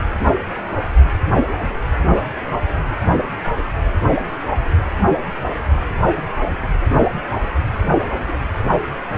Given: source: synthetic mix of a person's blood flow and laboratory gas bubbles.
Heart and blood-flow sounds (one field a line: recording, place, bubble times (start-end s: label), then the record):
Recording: Doppler ultrasound of blood flow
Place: precordium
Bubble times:
no bubbles
From the record:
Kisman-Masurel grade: 000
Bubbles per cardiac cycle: 0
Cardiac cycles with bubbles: 0%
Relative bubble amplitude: no bubbles discernible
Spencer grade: 0 (complete lack of bubble signals)